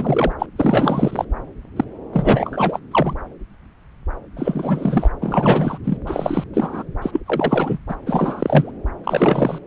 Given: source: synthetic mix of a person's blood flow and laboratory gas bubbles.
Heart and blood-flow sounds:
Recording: Doppler ultrasound of blood flow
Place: subclavian vein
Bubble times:
0.00-0.32 s: bubbles
0.39-0.46 s: bubbles
0.56-1.25 s: bubbles
1.76-1.84 s: bubbles
2.12-2.79 s: bubbles
2.91-3.14 s: bubbles
4.36-5.09 s: bubbles
5.21-5.78 s: bubbles
5.84-5.97 s: bubbles
6.07-6.44 s: bubbles
6.54-6.83 s: bubbles
7.02-7.21 s: bubbles
7.26-7.79 s: bubbles
7.88-7.96 s: bubbles
8.06-8.71 s: bubbles
9.04-9.59 s: bubbles
From the record:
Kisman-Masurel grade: 333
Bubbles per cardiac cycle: rolling drumbeat, 9 or more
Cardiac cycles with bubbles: 50 to 99%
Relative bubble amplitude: loud (0.450 to 0.775)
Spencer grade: 3 (all of the cardiac periods contain showers or single bubble signals, but not dominating or overriding the cardiac motion signals)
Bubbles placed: anywhere in the cardiac cycle

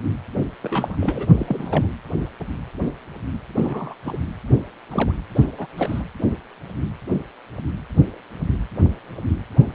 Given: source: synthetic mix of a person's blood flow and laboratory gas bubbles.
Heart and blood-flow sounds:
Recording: Doppler ultrasound of blood flow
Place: precordium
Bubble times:
0.62-0.96 s: bubbles
0.99-1.27 s: bubbles
1.30-1.86 s: bubbles
3.56-3.94 s: bubbles
4.05-4.17 s: bubbles
4.90-5.12 s: bubbles
5.35-5.44 s: bubbles
5.58-5.67 s: bubbles
5.77-6.03 s: bubbles
9.58-9.66 s: bubbles
From the record:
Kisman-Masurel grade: 222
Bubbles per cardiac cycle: several, 3 to 8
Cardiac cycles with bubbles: 10 to 50%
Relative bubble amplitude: moderate (0.250 to 0.450)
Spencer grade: 2 (many but less than half of the cardiac periods contain bubble signals, singularly or in groups)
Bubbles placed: anywhere in the cardiac cycle

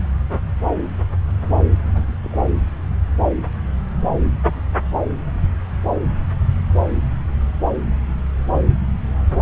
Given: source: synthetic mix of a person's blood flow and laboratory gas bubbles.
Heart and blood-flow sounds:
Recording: Doppler ultrasound of blood flow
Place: subclavian vein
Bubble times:
1.84-2.16 s: bubbles
2.23-2.40 s: bubbles
From the record:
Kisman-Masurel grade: 221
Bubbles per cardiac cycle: several, 3 to 8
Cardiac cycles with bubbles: 10 to 50%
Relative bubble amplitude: barely perceptible (0.100 to 0.250)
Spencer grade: 2 (many but less than half of the cardiac periods contain bubble signals, singularly or in groups)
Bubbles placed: anywhere in the cardiac cycle

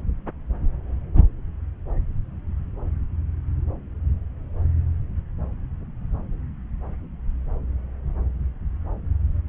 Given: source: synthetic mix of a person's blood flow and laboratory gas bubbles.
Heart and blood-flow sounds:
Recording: Doppler ultrasound of blood flow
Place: subclavian vein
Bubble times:
no bubbles
From the record:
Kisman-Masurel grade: 000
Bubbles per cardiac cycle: 0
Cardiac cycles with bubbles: 0%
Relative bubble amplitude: no bubbles discernible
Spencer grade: 0 (complete lack of bubble signals)

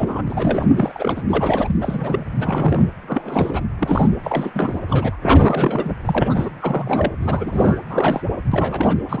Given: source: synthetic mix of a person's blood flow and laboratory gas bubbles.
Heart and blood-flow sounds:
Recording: Doppler ultrasound of blood flow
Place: precordium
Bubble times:
0.00-0.23 s: bubbles
0.27-0.66 s: bubbles
0.74-1.22 s: bubbles
1.28-1.78 s: bubbles
1.80-2.26 s: bubbles
2.38-2.87 s: bubbles
3.02-3.61 s: bubbles
3.79-4.10 s: bubbles
4.23-4.50 s: bubbles
4.54-4.79 s: bubbles
4.88-5.16 s: bubbles
5.23-5.43 s: bubbles
5.46-5.92 s: bubbles
6.05-6.51 s: bubbles
6.60-7.12 s: bubbles
7.20-7.79 s: bubbles
7.89-8.23 s: bubbles
8.52-8.96 s: bubbles
9.09-9.20 s: bubbles
From the record:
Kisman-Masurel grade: 332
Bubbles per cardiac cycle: rolling drumbeat, 9 or more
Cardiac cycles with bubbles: 50 to 99%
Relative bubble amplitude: moderate (0.250 to 0.450)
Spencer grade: 3 (all of the cardiac periods contain showers or single bubble signals, but not dominating or overriding the cardiac motion signals)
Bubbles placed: anywhere in the cardiac cycle

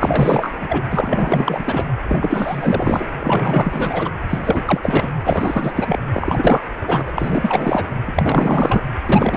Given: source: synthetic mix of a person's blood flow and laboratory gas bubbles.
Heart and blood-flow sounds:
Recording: Doppler ultrasound of blood flow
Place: precordium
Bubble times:
0.00-0.57 s: bubbles
0.61-0.84 s: bubbles
0.90-1.84 s: bubbles
2.07-3.07 s: bubbles
3.19-4.10 s: bubbles
4.29-4.39 s: bubbles
4.45-4.62 s: bubbles
4.65-5.12 s: bubbles
5.26-5.73 s: bubbles
5.75-6.00 s: bubbles
6.13-6.66 s: bubbles
6.81-7.12 s: bubbles
7.15-7.86 s: bubbles
8.06-8.12 s: bubbles
8.16-8.81 s: bubbles
9.05-9.37 s: bubbles
From the record:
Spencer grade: 4 (maximum detectable bubble signal sounding continuously throughout systole and diastole of every cardiac period, and overriding the amplitude of the normal cardiac signals)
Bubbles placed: anywhere in the cardiac cycle

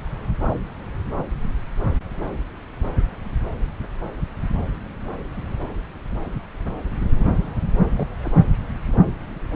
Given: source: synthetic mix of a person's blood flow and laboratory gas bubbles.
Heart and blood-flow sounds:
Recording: Doppler ultrasound of blood flow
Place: subclavian vein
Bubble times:
7.96-8.08 s: bubbles
8.23-8.31 s: bubbles
From the record:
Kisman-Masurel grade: 111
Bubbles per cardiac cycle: 1 to 2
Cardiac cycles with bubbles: 1 to 10%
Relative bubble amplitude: barely perceptible (0.100 to 0.250)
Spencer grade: 1 (occasional bubble signal discernible with the cardiac motion signal, with majority of cardiac periods free of bubbles)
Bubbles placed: anywhere in the cardiac cycle

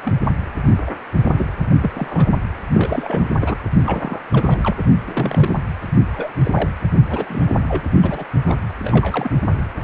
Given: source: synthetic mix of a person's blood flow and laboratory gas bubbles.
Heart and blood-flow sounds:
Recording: Doppler ultrasound of blood flow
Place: precordium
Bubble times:
0.04-0.20 s: bubbles
0.66-0.74 s: bubbles
0.86-0.90 s: bubbles
1.24-1.31 s: bubbles
1.37-1.47 s: bubbles
1.81-1.91 s: bubbles
1.95-2.31 s: bubbles
2.73-3.56 s: bubbles
3.83-4.21 s: bubbles
4.32-4.58 s: bubbles
4.62-4.74 s: bubbles
4.78-4.83 s: bubbles
5.07-5.58 s: bubbles
6.13-6.29 s: bubbles
6.45-6.52 s: bubbles
6.54-6.70 s: bubbles
7.09-7.56 s: bubbles
7.68-7.82 s: bubbles
8.01-8.24 s: bubbles
8.46-8.56 s: bubbles
8.81-9.30 s: bubbles
9.81-9.84 s: bubbles
From the record:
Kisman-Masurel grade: 242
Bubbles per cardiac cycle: several, 3 to 8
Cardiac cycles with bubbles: 100%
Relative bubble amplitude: moderate (0.250 to 0.450)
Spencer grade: 3 (all of the cardiac periods contain showers or single bubble signals, but not dominating or overriding the cardiac motion signals)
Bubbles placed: anywhere in the cardiac cycle

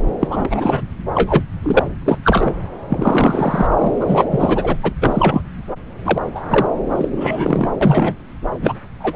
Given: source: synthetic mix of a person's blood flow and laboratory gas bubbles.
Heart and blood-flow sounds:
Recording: Doppler ultrasound of blood flow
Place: subclavian vein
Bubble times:
0.20-0.81 s: bubbles
1.15-1.44 s: bubbles
1.62-1.87 s: bubbles
2.04-2.18 s: bubbles
2.24-2.53 s: bubbles
2.89-3.67 s: bubbles
3.81-4.25 s: bubbles
4.30-4.76 s: bubbles
4.83-4.94 s: bubbles
5.00-5.42 s: bubbles
6.05-6.21 s: bubbles
6.35-6.41 s: bubbles
6.50-6.69 s: bubbles
6.92-7.08 s: bubbles
7.12-7.69 s: bubbles
7.81-8.14 s: bubbles
8.62-8.77 s: bubbles
8.99-9.16 s: bubbles
From the record:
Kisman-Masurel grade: 243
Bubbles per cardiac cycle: several, 3 to 8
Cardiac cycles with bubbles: 100%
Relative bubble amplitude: loud (0.450 to 0.775)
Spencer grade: 3 (all of the cardiac periods contain showers or single bubble signals, but not dominating or overriding the cardiac motion signals)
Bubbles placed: anywhere in the cardiac cycle

